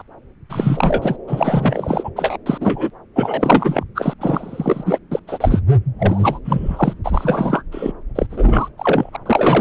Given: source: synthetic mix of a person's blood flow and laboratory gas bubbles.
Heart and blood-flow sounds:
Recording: Doppler ultrasound of blood flow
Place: subclavian vein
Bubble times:
0.00-0.02 s: bubbles
0.49-1.16 s: bubbles
1.27-2.10 s: bubbles
2.16-2.38 s: bubbles
2.46-2.58 s: bubbles
2.60-2.91 s: bubbles
3.16-3.84 s: bubbles
3.95-4.13 s: bubbles
4.21-4.99 s: bubbles
5.11-5.20 s: bubbles
5.27-5.62 s: bubbles
5.99-6.39 s: bubbles
6.45-6.94 s: bubbles
7.04-7.63 s: bubbles
7.72-7.92 s: bubbles
8.15-8.26 s: bubbles
8.30-8.68 s: bubbles
8.78-9.10 s: bubbles
9.13-9.16 s: bubbles
9.25-9.61 s: bubbles
From the record:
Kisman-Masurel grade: 343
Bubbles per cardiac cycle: rolling drumbeat, 9 or more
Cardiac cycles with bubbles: 100%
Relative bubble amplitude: loud (0.450 to 0.775)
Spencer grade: 3 (all of the cardiac periods contain showers or single bubble signals, but not dominating or overriding the cardiac motion signals)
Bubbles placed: anywhere in the cardiac cycle

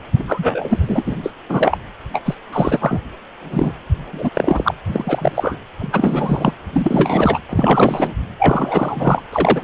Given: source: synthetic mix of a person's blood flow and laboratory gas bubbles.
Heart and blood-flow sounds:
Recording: Doppler ultrasound of blood flow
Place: precordium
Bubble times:
0.19-0.24 s: bubbles
0.27-1.16 s: bubbles
1.23-1.32 s: bubbles
1.49-1.78 s: bubbles
2.13-2.35 s: bubbles
2.52-3.00 s: bubbles
3.50-3.73 s: bubbles
4.11-4.30 s: bubbles
4.33-4.74 s: bubbles
4.86-5.57 s: bubbles
5.78-6.54 s: bubbles
6.72-7.39 s: bubbles
7.49-8.12 s: bubbles
8.38-9.23 s: bubbles
9.32-9.63 s: bubbles
From the record:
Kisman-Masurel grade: 343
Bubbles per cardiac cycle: rolling drumbeat, 9 or more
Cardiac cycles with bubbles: 100%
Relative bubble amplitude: loud (0.450 to 0.775)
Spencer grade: 3 (all of the cardiac periods contain showers or single bubble signals, but not dominating or overriding the cardiac motion signals)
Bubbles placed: anywhere in the cardiac cycle

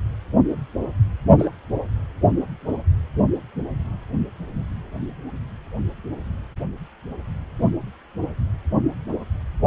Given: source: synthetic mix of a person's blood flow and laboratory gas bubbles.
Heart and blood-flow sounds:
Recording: Doppler ultrasound of blood flow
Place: precordium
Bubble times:
1.38-1.48 s: bubbles
From the record:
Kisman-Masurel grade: 111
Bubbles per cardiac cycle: 1 to 2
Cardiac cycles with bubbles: 1 to 10%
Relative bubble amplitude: barely perceptible (0.100 to 0.250)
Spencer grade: 1 (occasional bubble signal discernible with the cardiac motion signal, with majority of cardiac periods free of bubbles)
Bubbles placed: only in the low amplitude regions of the cardiac cycle

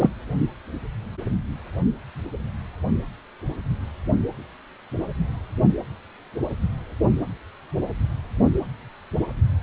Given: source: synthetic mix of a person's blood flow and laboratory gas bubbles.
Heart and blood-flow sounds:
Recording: Doppler ultrasound of blood flow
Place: precordium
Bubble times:
0.00-0.10 s: bubbles
From the record:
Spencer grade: 2 (many but less than half of the cardiac periods contain bubble signals, singularly or in groups)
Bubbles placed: anywhere in the cardiac cycle

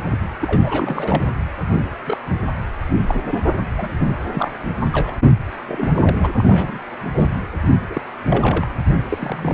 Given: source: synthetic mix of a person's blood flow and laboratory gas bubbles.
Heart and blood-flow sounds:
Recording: Doppler ultrasound of blood flow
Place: precordium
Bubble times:
0.00-0.17 s: bubbles
0.41-1.29 s: bubbles
1.62-1.97 s: bubbles
2.07-2.17 s: bubbles
2.97-3.21 s: bubbles
3.28-3.43 s: bubbles
3.78-3.88 s: bubbles
3.98-4.12 s: bubbles
4.33-4.50 s: bubbles
4.92-5.15 s: bubbles
5.67-5.88 s: bubbles
5.95-6.28 s: bubbles
6.38-6.83 s: bubbles
7.12-7.30 s: bubbles
7.89-8.01 s: bubbles
8.29-8.67 s: bubbles
9.09-9.54 s: bubbles
From the record:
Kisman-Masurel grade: 242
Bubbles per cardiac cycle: several, 3 to 8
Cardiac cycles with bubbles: 100%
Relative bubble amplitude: moderate (0.250 to 0.450)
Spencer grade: 3 (all of the cardiac periods contain showers or single bubble signals, but not dominating or overriding the cardiac motion signals)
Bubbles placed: anywhere in the cardiac cycle

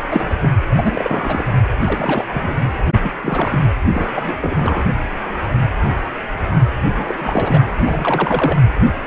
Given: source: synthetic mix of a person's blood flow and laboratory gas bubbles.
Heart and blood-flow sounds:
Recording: Doppler ultrasound of blood flow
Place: precordium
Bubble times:
0.11-0.38 s: bubbles
0.41-0.53 s: bubbles
0.76-1.56 s: bubbles
1.83-2.24 s: bubbles
2.29-2.59 s: bubbles
3.01-3.12 s: bubbles
3.23-3.60 s: bubbles
3.94-4.08 s: bubbles
4.15-4.38 s: bubbles
4.41-4.86 s: bubbles
6.81-7.64 s: bubbles
7.85-8.62 s: bubbles
From the record:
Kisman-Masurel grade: 332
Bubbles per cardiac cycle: rolling drumbeat, 9 or more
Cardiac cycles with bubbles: 50 to 99%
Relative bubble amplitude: moderate (0.250 to 0.450)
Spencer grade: 3 (all of the cardiac periods contain showers or single bubble signals, but not dominating or overriding the cardiac motion signals)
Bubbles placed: anywhere in the cardiac cycle

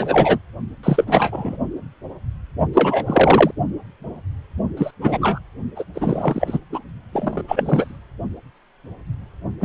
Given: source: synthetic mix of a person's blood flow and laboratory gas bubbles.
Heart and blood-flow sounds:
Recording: Doppler ultrasound of blood flow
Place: precordium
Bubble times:
0.00-0.39 s: bubbles
0.83-1.04 s: bubbles
1.06-1.57 s: bubbles
2.74-3.51 s: bubbles
4.77-4.91 s: bubbles
5.01-5.39 s: bubbles
5.75-5.84 s: bubbles
5.94-6.58 s: bubbles
6.72-6.79 s: bubbles
7.12-7.43 s: bubbles
7.47-7.98 s: bubbles
9.60-9.64 s: bubbles
From the record:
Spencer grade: 3 (all of the cardiac periods contain showers or single bubble signals, but not dominating or overriding the cardiac motion signals)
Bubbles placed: only in the low amplitude regions of the cardiac cycle

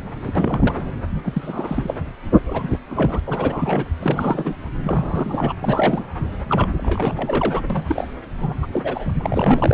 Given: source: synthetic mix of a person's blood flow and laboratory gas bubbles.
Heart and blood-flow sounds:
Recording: Doppler ultrasound of blood flow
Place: subclavian vein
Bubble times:
0.24-0.32 s: bubbles
0.35-0.82 s: bubbles
1.15-1.95 s: bubbles
2.46-2.80 s: bubbles
2.88-3.20 s: bubbles
3.26-3.85 s: bubbles
4.02-4.54 s: bubbles
4.83-5.53 s: bubbles
5.62-6.05 s: bubbles
6.49-6.67 s: bubbles
6.78-7.61 s: bubbles
7.70-8.08 s: bubbles
8.40-8.54 s: bubbles
8.62-8.67 s: bubbles
8.72-9.11 s: bubbles
9.18-9.74 s: bubbles
From the record:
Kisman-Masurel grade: 332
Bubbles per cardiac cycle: rolling drumbeat, 9 or more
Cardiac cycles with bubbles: 50 to 99%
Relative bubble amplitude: moderate (0.250 to 0.450)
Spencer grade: 3 (all of the cardiac periods contain showers or single bubble signals, but not dominating or overriding the cardiac motion signals)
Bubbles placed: anywhere in the cardiac cycle

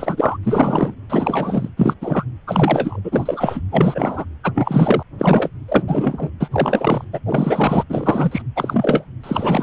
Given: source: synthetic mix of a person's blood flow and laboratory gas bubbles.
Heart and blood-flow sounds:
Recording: Doppler ultrasound of blood flow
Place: precordium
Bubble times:
0.00-0.38 s: bubbles
0.43-0.95 s: bubbles
1.09-1.69 s: bubbles
1.77-1.96 s: bubbles
2.02-2.25 s: bubbles
2.47-3.00 s: bubbles
3.04-3.60 s: bubbles
3.71-4.25 s: bubbles
4.43-4.52 s: bubbles
4.54-5.03 s: bubbles
5.18-5.51 s: bubbles
5.68-6.30 s: bubbles
6.40-6.48 s: bubbles
6.52-7.04 s: bubbles
7.12-7.20 s: bubbles
7.26-7.84 s: bubbles
7.89-8.42 s: bubbles
8.55-9.05 s: bubbles
9.23-9.63 s: bubbles
From the record:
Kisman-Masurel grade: 343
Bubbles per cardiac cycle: rolling drumbeat, 9 or more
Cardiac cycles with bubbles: 100%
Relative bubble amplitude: loud (0.450 to 0.775)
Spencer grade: 3 (all of the cardiac periods contain showers or single bubble signals, but not dominating or overriding the cardiac motion signals)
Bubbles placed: anywhere in the cardiac cycle

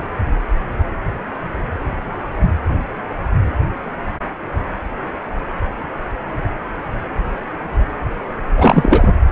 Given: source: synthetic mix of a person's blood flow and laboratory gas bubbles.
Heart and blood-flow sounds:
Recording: Doppler ultrasound of blood flow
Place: precordium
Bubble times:
8.56-9.08 s: bubbles
From the record:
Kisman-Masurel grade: 213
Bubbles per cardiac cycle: several, 3 to 8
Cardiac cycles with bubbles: 1 to 10%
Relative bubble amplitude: loud (0.450 to 0.775)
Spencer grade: 1 (occasional bubble signal discernible with the cardiac motion signal, with majority of cardiac periods free of bubbles)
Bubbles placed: anywhere in the cardiac cycle

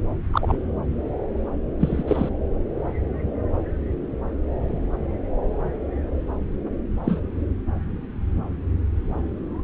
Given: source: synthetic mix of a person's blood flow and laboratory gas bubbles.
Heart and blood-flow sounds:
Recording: Doppler ultrasound of blood flow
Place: subclavian vein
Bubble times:
0.33-0.56 s: bubbles
1.80-2.03 s: bubbles
2.08-2.29 s: bubbles
7.04-7.20 s: bubbles
From the record:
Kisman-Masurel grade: 122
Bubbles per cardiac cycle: 1 to 2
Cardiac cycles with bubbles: 10 to 50%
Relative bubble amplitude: moderate (0.250 to 0.450)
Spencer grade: 2 (many but less than half of the cardiac periods contain bubble signals, singularly or in groups)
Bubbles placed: anywhere in the cardiac cycle

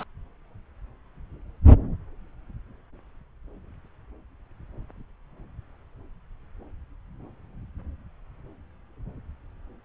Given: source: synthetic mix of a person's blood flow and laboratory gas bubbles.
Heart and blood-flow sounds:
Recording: Doppler ultrasound of blood flow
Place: subclavian vein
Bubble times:
0.00-0.03 s: bubbles
From the record:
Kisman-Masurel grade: 222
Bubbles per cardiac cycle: several, 3 to 8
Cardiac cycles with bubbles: 10 to 50%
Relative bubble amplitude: moderate (0.250 to 0.450)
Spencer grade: 2 (many but less than half of the cardiac periods contain bubble signals, singularly or in groups)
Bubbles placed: anywhere in the cardiac cycle

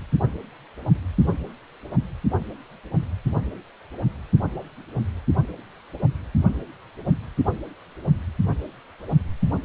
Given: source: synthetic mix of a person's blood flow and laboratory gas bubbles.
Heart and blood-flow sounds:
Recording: Doppler ultrasound of blood flow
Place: precordium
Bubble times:
9.63-9.65 s: bubbles
From the record:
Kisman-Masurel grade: 211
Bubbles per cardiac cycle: several, 3 to 8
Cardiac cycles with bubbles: 1 to 10%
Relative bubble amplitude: barely perceptible (0.100 to 0.250)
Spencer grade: 1 (occasional bubble signal discernible with the cardiac motion signal, with majority of cardiac periods free of bubbles)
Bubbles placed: only in the low amplitude regions of the cardiac cycle

